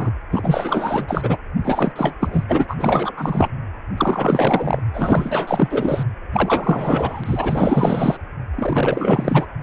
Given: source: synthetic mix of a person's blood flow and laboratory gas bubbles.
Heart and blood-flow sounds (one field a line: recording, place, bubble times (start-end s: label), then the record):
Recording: Doppler ultrasound of blood flow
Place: precordium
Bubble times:
0.00-0.11 s: bubbles
0.32-1.37 s: bubbles
1.64-1.92 s: bubbles
1.96-2.15 s: bubbles
2.20-2.44 s: bubbles
2.48-2.66 s: bubbles
2.69-3.12 s: bubbles
3.17-3.48 s: bubbles
3.96-4.83 s: bubbles
4.93-6.03 s: bubbles
6.32-8.18 s: bubbles
8.55-9.47 s: bubbles
From the record:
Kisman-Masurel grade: 444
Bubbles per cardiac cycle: continuous sound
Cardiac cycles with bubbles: 100%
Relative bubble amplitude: maximal (0.775 to 0.999)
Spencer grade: 4 (maximum detectable bubble signal sounding continuously throughout systole and diastole of every cardiac period, and overriding the amplitude of the normal cardiac signals)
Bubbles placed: anywhere in the cardiac cycle